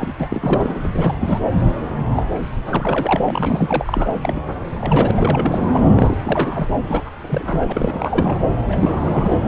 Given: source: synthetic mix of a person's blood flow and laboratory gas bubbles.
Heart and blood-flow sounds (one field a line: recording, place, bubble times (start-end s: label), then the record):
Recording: Doppler ultrasound of blood flow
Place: subclavian vein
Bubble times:
0.00-0.13 s: bubbles
0.20-0.79 s: bubbles
0.83-0.88 s: bubbles
0.92-1.17 s: bubbles
1.20-1.40 s: bubbles
2.15-2.42 s: bubbles
2.67-3.17 s: bubbles
3.23-4.07 s: bubbles
4.21-4.43 s: bubbles
4.79-5.59 s: bubbles
5.71-5.89 s: bubbles
5.95-6.17 s: bubbles
6.24-6.70 s: bubbles
6.84-7.11 s: bubbles
7.21-8.40 s: bubbles
8.68-9.39 s: bubbles
From the record:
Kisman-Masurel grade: 342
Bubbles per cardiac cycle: rolling drumbeat, 9 or more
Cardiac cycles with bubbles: 100%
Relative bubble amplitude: moderate (0.250 to 0.450)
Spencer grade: 3 (all of the cardiac periods contain showers or single bubble signals, but not dominating or overriding the cardiac motion signals)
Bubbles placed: anywhere in the cardiac cycle